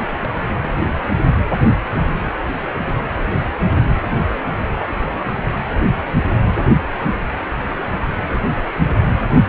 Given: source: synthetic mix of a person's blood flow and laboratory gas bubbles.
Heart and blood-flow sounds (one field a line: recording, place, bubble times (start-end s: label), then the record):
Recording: Doppler ultrasound of blood flow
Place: precordium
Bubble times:
0.10-0.18 s: bubbles
0.23-0.29 s: bubbles
0.34-0.42 s: bubbles
0.58-1.03 s: bubbles
4.78-4.95 s: bubbles
4.98-5.31 s: bubbles
From the record:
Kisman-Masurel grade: 221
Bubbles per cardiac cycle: several, 3 to 8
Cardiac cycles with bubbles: 10 to 50%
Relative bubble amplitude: barely perceptible (0.100 to 0.250)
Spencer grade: 2 (many but less than half of the cardiac periods contain bubble signals, singularly or in groups)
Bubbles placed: anywhere in the cardiac cycle